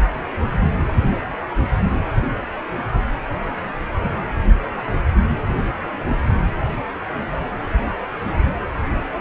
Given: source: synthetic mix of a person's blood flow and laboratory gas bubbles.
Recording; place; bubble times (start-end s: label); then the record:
Doppler ultrasound of blood flow; precordium
no bubbles
From the record:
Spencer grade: 0 (complete lack of bubble signals)